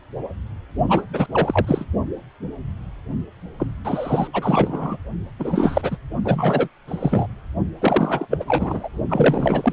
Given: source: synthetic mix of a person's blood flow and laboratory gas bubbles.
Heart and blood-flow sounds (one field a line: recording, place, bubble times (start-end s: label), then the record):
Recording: Doppler ultrasound of blood flow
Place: precordium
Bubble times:
0.88-1.02 s: bubbles
1.13-1.26 s: bubbles
1.32-1.85 s: bubbles
3.60-3.67 s: bubbles
3.85-4.27 s: bubbles
4.33-4.97 s: bubbles
5.39-5.96 s: bubbles
6.24-6.68 s: bubbles
6.88-7.27 s: bubbles
7.80-8.27 s: bubbles
8.30-8.44 s: bubbles
8.47-8.88 s: bubbles
9.09-9.73 s: bubbles
From the record:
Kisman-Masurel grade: 332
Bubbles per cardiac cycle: rolling drumbeat, 9 or more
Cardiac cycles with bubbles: 50 to 99%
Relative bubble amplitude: moderate (0.250 to 0.450)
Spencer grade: 3 (all of the cardiac periods contain showers or single bubble signals, but not dominating or overriding the cardiac motion signals)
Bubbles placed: only in the low amplitude regions of the cardiac cycle